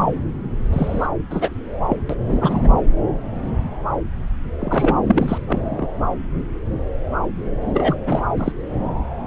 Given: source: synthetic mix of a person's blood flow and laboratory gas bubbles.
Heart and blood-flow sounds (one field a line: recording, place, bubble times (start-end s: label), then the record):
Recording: Doppler ultrasound of blood flow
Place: subclavian vein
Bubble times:
0.72-1.06 s: bubbles
1.30-1.50 s: bubbles
1.88-1.96 s: bubbles
2.09-2.15 s: bubbles
2.27-2.69 s: bubbles
4.59-4.97 s: bubbles
5.08-5.38 s: bubbles
5.48-5.87 s: bubbles
7.73-7.96 s: bubbles
8.06-8.22 s: bubbles
8.38-8.52 s: bubbles
From the record:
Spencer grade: 3 (all of the cardiac periods contain showers or single bubble signals, but not dominating or overriding the cardiac motion signals)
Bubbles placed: anywhere in the cardiac cycle